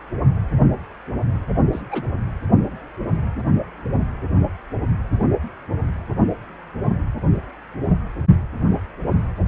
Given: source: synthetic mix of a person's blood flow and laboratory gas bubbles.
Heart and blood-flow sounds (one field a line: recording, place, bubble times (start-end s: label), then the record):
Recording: Doppler ultrasound of blood flow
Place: precordium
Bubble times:
1.72-1.82 s: bubbles
1.91-2.02 s: bubbles
From the record:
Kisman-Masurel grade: 111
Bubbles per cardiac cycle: 1 to 2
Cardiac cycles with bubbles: 1 to 10%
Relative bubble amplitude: barely perceptible (0.100 to 0.250)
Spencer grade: 1 (occasional bubble signal discernible with the cardiac motion signal, with majority of cardiac periods free of bubbles)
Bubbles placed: only in the low amplitude regions of the cardiac cycle